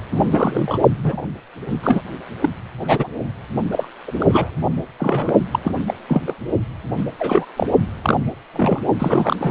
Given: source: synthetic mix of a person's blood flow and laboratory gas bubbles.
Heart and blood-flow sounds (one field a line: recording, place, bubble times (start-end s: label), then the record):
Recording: Doppler ultrasound of blood flow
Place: precordium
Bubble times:
0.11-0.78 s: bubbles
1.03-1.23 s: bubbles
1.67-1.79 s: bubbles
1.82-2.01 s: bubbles
2.40-2.50 s: bubbles
2.77-3.08 s: bubbles
3.72-3.88 s: bubbles
4.07-4.12 s: bubbles
4.20-4.57 s: bubbles
4.98-5.34 s: bubbles
5.51-5.59 s: bubbles
5.64-5.80 s: bubbles
5.87-5.94 s: bubbles
6.08-6.22 s: bubbles
6.27-6.34 s: bubbles
6.97-7.06 s: bubbles
7.20-7.46 s: bubbles
7.56-7.67 s: bubbles
8.04-8.17 s: bubbles
8.54-8.82 s: bubbles
8.99-9.51 s: bubbles
From the record:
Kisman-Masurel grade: 242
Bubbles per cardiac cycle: several, 3 to 8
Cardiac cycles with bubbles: 100%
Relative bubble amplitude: moderate (0.250 to 0.450)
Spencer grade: 3 (all of the cardiac periods contain showers or single bubble signals, but not dominating or overriding the cardiac motion signals)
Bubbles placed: only in the low amplitude regions of the cardiac cycle